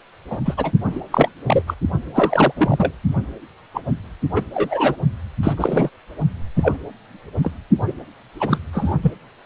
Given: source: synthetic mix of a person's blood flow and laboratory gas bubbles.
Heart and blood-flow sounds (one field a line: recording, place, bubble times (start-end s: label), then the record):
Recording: Doppler ultrasound of blood flow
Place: precordium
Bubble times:
0.29-0.38 s: bubbles
0.45-0.55 s: bubbles
0.57-0.72 s: bubbles
0.84-1.00 s: bubbles
1.11-1.29 s: bubbles
1.46-1.62 s: bubbles
1.67-1.74 s: bubbles
2.13-2.52 s: bubbles
2.56-2.93 s: bubbles
3.74-3.81 s: bubbles
4.36-4.42 s: bubbles
4.54-4.97 s: bubbles
5.43-5.54 s: bubbles
5.57-5.90 s: bubbles
6.57-6.77 s: bubbles
7.42-7.51 s: bubbles
7.87-7.93 s: bubbles
8.40-8.58 s: bubbles
8.72-8.95 s: bubbles
9.02-9.12 s: bubbles
From the record:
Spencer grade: 3 (all of the cardiac periods contain showers or single bubble signals, but not dominating or overriding the cardiac motion signals)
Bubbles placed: only in the low amplitude regions of the cardiac cycle